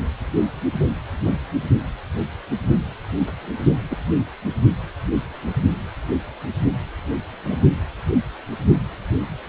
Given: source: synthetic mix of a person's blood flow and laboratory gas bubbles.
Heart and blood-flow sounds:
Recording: Doppler ultrasound of blood flow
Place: precordium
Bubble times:
1.25-1.34 s: bubbles
3.90-3.98 s: bubbles
7.44-7.56 s: bubbles
From the record:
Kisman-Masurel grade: 123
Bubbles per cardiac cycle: 1 to 2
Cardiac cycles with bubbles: 10 to 50%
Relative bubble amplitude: loud (0.450 to 0.775)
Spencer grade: 2 (many but less than half of the cardiac periods contain bubble signals, singularly or in groups)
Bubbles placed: only in the low amplitude regions of the cardiac cycle

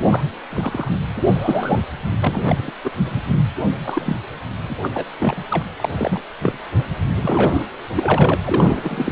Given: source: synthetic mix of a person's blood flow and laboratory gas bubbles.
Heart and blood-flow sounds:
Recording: Doppler ultrasound of blood flow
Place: precordium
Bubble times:
0.00-0.28 s: bubbles
0.51-0.90 s: bubbles
1.16-1.26 s: bubbles
1.32-1.81 s: bubbles
2.21-2.71 s: bubbles
2.83-2.90 s: bubbles
3.05-3.22 s: bubbles
3.85-4.16 s: bubbles
4.69-4.77 s: bubbles
4.82-5.05 s: bubbles
5.19-5.45 s: bubbles
5.51-5.63 s: bubbles
5.77-5.89 s: bubbles
5.97-6.21 s: bubbles
6.41-6.58 s: bubbles
7.22-7.63 s: bubbles
7.96-8.34 s: bubbles
8.43-9.12 s: bubbles
From the record:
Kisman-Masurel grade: 242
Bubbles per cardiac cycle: several, 3 to 8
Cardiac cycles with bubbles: 100%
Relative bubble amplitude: moderate (0.250 to 0.450)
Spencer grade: 3 (all of the cardiac periods contain showers or single bubble signals, but not dominating or overriding the cardiac motion signals)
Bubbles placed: anywhere in the cardiac cycle

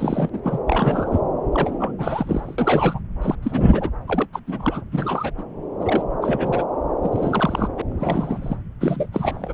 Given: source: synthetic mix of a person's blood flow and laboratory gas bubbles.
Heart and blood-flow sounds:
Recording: Doppler ultrasound of blood flow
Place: subclavian vein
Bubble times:
0.00-0.30 s: bubbles
0.33-0.41 s: bubbles
0.44-0.58 s: bubbles
0.66-1.19 s: bubbles
1.53-1.92 s: bubbles
1.98-2.99 s: bubbles
3.22-3.35 s: bubbles
3.42-3.90 s: bubbles
4.08-4.26 s: bubbles
4.33-4.39 s: bubbles
4.47-4.81 s: bubbles
4.92-5.30 s: bubbles
5.38-5.43 s: bubbles
5.80-6.03 s: bubbles
6.22-6.64 s: bubbles
7.03-7.68 s: bubbles
7.76-7.81 s: bubbles
7.91-8.57 s: bubbles
8.81-9.07 s: bubbles
9.12-9.54 s: bubbles
From the record:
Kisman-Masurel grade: 332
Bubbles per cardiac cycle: rolling drumbeat, 9 or more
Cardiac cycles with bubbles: 50 to 99%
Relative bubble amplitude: moderate (0.250 to 0.450)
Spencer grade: 3 (all of the cardiac periods contain showers or single bubble signals, but not dominating or overriding the cardiac motion signals)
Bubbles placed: anywhere in the cardiac cycle

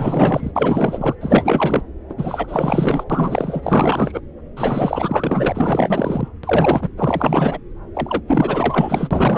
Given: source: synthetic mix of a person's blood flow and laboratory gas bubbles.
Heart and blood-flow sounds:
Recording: Doppler ultrasound of blood flow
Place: subclavian vein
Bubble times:
0.00-0.52 s: bubbles
0.55-1.15 s: bubbles
1.20-1.83 s: bubbles
2.09-2.14 s: bubbles
2.18-3.04 s: bubbles
3.10-4.21 s: bubbles
4.56-6.28 s: bubbles
6.43-6.89 s: bubbles
6.97-7.58 s: bubbles
7.94-8.21 s: bubbles
8.27-9.38 s: bubbles
From the record:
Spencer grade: 4 (maximum detectable bubble signal sounding continuously throughout systole and diastole of every cardiac period, and overriding the amplitude of the normal cardiac signals)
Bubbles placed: anywhere in the cardiac cycle

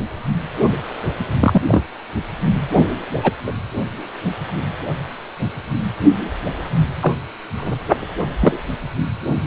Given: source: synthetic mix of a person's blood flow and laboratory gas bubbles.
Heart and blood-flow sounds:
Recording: Doppler ultrasound of blood flow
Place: precordium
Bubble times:
1.40-1.61 s: bubbles
1.68-1.83 s: bubbles
3.23-3.33 s: bubbles
3.47-3.52 s: bubbles
7.02-7.13 s: bubbles
7.57-7.79 s: bubbles
8.41-8.60 s: bubbles
From the record:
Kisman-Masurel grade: 123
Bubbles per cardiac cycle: 1 to 2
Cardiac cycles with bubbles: 10 to 50%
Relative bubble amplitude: loud (0.450 to 0.775)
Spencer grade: 2 (many but less than half of the cardiac periods contain bubble signals, singularly or in groups)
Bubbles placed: anywhere in the cardiac cycle

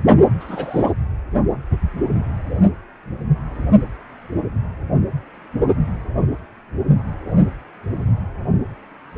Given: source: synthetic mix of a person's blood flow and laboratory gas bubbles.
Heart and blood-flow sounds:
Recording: Doppler ultrasound of blood flow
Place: precordium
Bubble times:
0.40-0.92 s: bubbles
From the record:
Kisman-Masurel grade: 211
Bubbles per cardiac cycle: several, 3 to 8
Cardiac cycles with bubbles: 1 to 10%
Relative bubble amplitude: barely perceptible (0.100 to 0.250)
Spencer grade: 1 (occasional bubble signal discernible with the cardiac motion signal, with majority of cardiac periods free of bubbles)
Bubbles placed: anywhere in the cardiac cycle

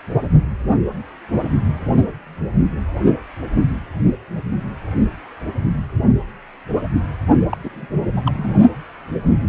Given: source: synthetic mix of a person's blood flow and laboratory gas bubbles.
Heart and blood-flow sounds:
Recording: Doppler ultrasound of blood flow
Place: precordium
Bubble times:
7.49-7.58 s: bubbles
7.64-7.69 s: bubbles
7.73-7.86 s: bubbles
8.16-8.22 s: bubbles
8.25-8.55 s: bubbles
From the record:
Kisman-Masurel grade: 212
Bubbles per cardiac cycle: several, 3 to 8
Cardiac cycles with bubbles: 1 to 10%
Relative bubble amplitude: moderate (0.250 to 0.450)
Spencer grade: 1 (occasional bubble signal discernible with the cardiac motion signal, with majority of cardiac periods free of bubbles)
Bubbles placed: only in the low amplitude regions of the cardiac cycle

